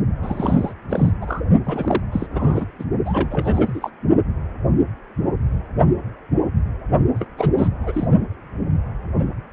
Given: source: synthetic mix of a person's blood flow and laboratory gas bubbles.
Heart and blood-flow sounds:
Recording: Doppler ultrasound of blood flow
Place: precordium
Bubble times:
0.23-0.73 s: bubbles
0.89-1.10 s: bubbles
1.21-1.42 s: bubbles
1.66-2.02 s: bubbles
2.12-2.27 s: bubbles
2.32-2.66 s: bubbles
2.79-2.84 s: bubbles
3.05-3.90 s: bubbles
7.15-7.26 s: bubbles
7.38-7.49 s: bubbles
7.55-7.69 s: bubbles
7.80-8.08 s: bubbles
From the record:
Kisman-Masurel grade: 332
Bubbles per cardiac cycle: rolling drumbeat, 9 or more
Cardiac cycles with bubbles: 50 to 99%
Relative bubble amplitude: moderate (0.250 to 0.450)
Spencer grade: 3 (all of the cardiac periods contain showers or single bubble signals, but not dominating or overriding the cardiac motion signals)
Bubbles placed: only in the low amplitude regions of the cardiac cycle

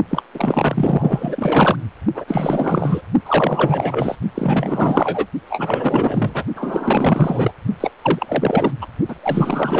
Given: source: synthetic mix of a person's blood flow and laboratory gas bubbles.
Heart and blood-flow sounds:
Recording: Doppler ultrasound of blood flow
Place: precordium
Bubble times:
0.10-0.23 s: bubbles
0.34-1.76 s: bubbles
2.14-2.25 s: bubbles
2.28-3.02 s: bubbles
3.25-4.15 s: bubbles
4.34-5.26 s: bubbles
5.50-6.44 s: bubbles
6.55-7.52 s: bubbles
7.80-7.90 s: bubbles
8.02-8.71 s: bubbles
8.81-8.87 s: bubbles
9.08-9.16 s: bubbles
9.22-9.80 s: bubbles
From the record:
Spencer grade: 4 (maximum detectable bubble signal sounding continuously throughout systole and diastole of every cardiac period, and overriding the amplitude of the normal cardiac signals)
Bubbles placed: only in the low amplitude regions of the cardiac cycle

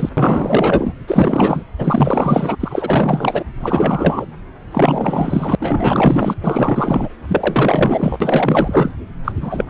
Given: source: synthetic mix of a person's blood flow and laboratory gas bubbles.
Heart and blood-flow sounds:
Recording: Doppler ultrasound of blood flow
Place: subclavian vein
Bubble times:
0.00-0.09 s: bubbles
0.17-0.92 s: bubbles
1.07-1.62 s: bubbles
1.77-2.56 s: bubbles
2.59-3.44 s: bubbles
3.60-4.25 s: bubbles
4.71-5.55 s: bubbles
5.60-6.37 s: bubbles
6.44-7.08 s: bubbles
7.28-8.92 s: bubbles
9.24-9.32 s: bubbles
9.41-9.65 s: bubbles
From the record:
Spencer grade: 4 (maximum detectable bubble signal sounding continuously throughout systole and diastole of every cardiac period, and overriding the amplitude of the normal cardiac signals)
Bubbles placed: anywhere in the cardiac cycle

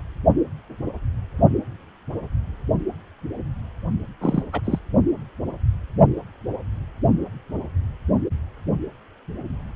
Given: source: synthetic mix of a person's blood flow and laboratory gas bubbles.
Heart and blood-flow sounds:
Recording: Doppler ultrasound of blood flow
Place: precordium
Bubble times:
4.21-4.44 s: bubbles
4.53-4.61 s: bubbles
4.64-4.79 s: bubbles
From the record:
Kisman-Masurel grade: 212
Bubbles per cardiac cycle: several, 3 to 8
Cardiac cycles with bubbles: 1 to 10%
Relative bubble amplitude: moderate (0.250 to 0.450)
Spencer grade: 1 (occasional bubble signal discernible with the cardiac motion signal, with majority of cardiac periods free of bubbles)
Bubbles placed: only in the low amplitude regions of the cardiac cycle

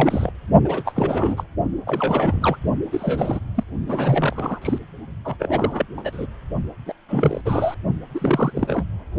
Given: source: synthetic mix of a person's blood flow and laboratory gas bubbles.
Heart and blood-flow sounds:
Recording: Doppler ultrasound of blood flow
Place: precordium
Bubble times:
0.00-0.31 s: bubbles
0.64-0.92 s: bubbles
0.95-1.48 s: bubbles
1.85-2.58 s: bubbles
2.92-3.40 s: bubbles
3.54-3.63 s: bubbles
3.87-4.79 s: bubbles
5.25-5.36 s: bubbles
5.39-5.86 s: bubbles
5.97-6.01 s: bubbles
6.04-6.26 s: bubbles
6.86-6.92 s: bubbles
7.08-7.41 s: bubbles
7.45-7.75 s: bubbles
8.14-8.84 s: bubbles
From the record:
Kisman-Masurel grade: 342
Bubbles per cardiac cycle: rolling drumbeat, 9 or more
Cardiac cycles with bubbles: 100%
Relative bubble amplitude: moderate (0.250 to 0.450)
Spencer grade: 3 (all of the cardiac periods contain showers or single bubble signals, but not dominating or overriding the cardiac motion signals)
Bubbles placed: only in the low amplitude regions of the cardiac cycle

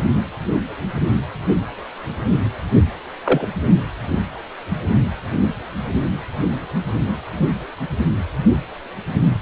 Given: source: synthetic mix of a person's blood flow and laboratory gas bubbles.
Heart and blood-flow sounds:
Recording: Doppler ultrasound of blood flow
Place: precordium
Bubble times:
3.24-3.46 s: bubbles
From the record:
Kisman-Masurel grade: 112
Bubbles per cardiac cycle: 1 to 2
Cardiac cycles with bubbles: 1 to 10%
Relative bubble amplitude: moderate (0.250 to 0.450)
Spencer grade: 1 (occasional bubble signal discernible with the cardiac motion signal, with majority of cardiac periods free of bubbles)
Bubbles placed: only in the low amplitude regions of the cardiac cycle

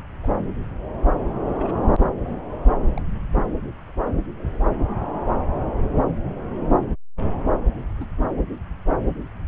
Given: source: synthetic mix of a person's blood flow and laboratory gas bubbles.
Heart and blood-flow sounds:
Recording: Doppler ultrasound of blood flow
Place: subclavian vein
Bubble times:
0.23-0.30 s: bubbles
1.44-1.74 s: bubbles
2.26-2.40 s: bubbles
2.95-3.00 s: bubbles
7.82-7.84 s: bubbles
7.91-8.06 s: bubbles
From the record:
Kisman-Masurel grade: 121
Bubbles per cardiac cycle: 1 to 2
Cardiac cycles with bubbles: 10 to 50%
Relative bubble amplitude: barely perceptible (0.100 to 0.250)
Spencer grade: 2 (many but less than half of the cardiac periods contain bubble signals, singularly or in groups)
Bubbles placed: anywhere in the cardiac cycle

